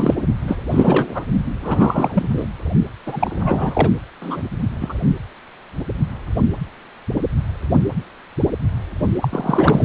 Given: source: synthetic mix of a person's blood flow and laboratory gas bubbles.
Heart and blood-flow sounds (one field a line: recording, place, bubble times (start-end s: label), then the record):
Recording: Doppler ultrasound of blood flow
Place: precordium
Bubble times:
0.00-0.14 s: bubbles
0.48-0.57 s: bubbles
0.71-1.23 s: bubbles
1.61-2.47 s: bubbles
3.06-3.90 s: bubbles
4.21-4.42 s: bubbles
4.81-4.93 s: bubbles
9.21-9.84 s: bubbles
From the record:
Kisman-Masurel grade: 333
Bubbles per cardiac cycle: rolling drumbeat, 9 or more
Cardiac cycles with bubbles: 50 to 99%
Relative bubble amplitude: loud (0.450 to 0.775)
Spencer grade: 3 (all of the cardiac periods contain showers or single bubble signals, but not dominating or overriding the cardiac motion signals)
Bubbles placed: only in the low amplitude regions of the cardiac cycle